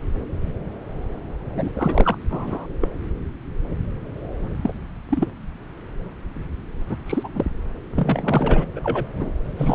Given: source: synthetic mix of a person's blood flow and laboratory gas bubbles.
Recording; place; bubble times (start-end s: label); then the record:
Doppler ultrasound of blood flow; subclavian vein
1.55-1.70 s: bubbles
1.74-2.17 s: bubbles
2.30-2.67 s: bubbles
2.80-2.88 s: bubbles
4.58-4.72 s: bubbles
5.10-5.27 s: bubbles
6.89-6.97 s: bubbles
7.06-7.29 s: bubbles
7.35-7.45 s: bubbles
7.95-8.65 s: bubbles
8.75-8.80 s: bubbles
8.83-9.06 s: bubbles
9.14-9.31 s: bubbles
9.56-9.75 s: bubbles
From the record:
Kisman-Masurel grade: 232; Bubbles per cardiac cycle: several, 3 to 8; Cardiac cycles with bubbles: 50 to 99%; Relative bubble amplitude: moderate (0.250 to 0.450); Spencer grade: 3 (all of the cardiac periods contain showers or single bubble signals, but not dominating or overriding the cardiac motion signals); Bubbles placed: anywhere in the cardiac cycle